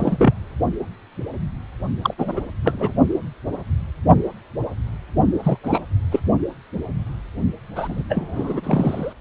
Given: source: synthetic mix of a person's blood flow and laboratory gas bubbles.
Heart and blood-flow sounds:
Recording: Doppler ultrasound of blood flow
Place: precordium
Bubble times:
0.00-0.34 s: bubbles
2.01-2.14 s: bubbles
2.18-2.41 s: bubbles
2.63-2.93 s: bubbles
5.43-5.58 s: bubbles
5.63-5.80 s: bubbles
6.11-6.20 s: bubbles
7.75-8.03 s: bubbles
8.09-9.13 s: bubbles
From the record:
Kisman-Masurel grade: 223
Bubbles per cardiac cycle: several, 3 to 8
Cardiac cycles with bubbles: 10 to 50%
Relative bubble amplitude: loud (0.450 to 0.775)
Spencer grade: 2 (many but less than half of the cardiac periods contain bubble signals, singularly or in groups)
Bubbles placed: only in the low amplitude regions of the cardiac cycle

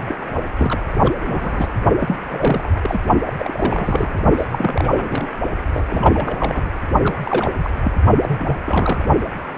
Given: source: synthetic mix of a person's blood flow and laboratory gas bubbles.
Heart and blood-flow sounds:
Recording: Doppler ultrasound of blood flow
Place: precordium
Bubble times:
0.07-0.15 s: bubbles
0.19-0.31 s: bubbles
0.57-0.83 s: bubbles
1.00-1.12 s: bubbles
1.27-1.69 s: bubbles
1.99-2.16 s: bubbles
2.25-2.70 s: bubbles
2.82-3.00 s: bubbles
3.23-4.20 s: bubbles
4.37-4.45 s: bubbles
4.50-5.28 s: bubbles
5.73-5.86 s: bubbles
5.90-6.70 s: bubbles
7.03-7.17 s: bubbles
7.25-7.53 s: bubbles
7.58-7.70 s: bubbles
7.82-7.92 s: bubbles
8.21-8.56 s: bubbles
8.64-9.05 s: bubbles
9.09-9.14 s: bubbles
From the record:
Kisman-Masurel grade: 342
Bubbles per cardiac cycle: rolling drumbeat, 9 or more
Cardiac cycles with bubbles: 100%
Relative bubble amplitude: moderate (0.250 to 0.450)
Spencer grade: 3 (all of the cardiac periods contain showers or single bubble signals, but not dominating or overriding the cardiac motion signals)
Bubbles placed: only in the low amplitude regions of the cardiac cycle

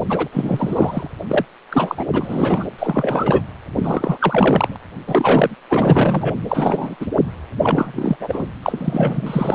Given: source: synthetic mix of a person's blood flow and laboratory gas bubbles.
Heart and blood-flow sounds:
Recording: Doppler ultrasound of blood flow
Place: precordium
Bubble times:
0.09-0.28 s: bubbles
0.32-1.08 s: bubbles
1.29-1.45 s: bubbles
1.71-2.04 s: bubbles
2.13-2.67 s: bubbles
2.78-3.40 s: bubbles
3.75-4.76 s: bubbles
5.07-5.55 s: bubbles
5.70-6.35 s: bubbles
6.48-6.96 s: bubbles
7.00-7.07 s: bubbles
7.62-8.16 s: bubbles
8.20-8.49 s: bubbles
8.62-9.55 s: bubbles
From the record:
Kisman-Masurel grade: 333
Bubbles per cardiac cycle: rolling drumbeat, 9 or more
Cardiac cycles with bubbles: 50 to 99%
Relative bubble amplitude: loud (0.450 to 0.775)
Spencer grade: 3 (all of the cardiac periods contain showers or single bubble signals, but not dominating or overriding the cardiac motion signals)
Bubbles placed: anywhere in the cardiac cycle

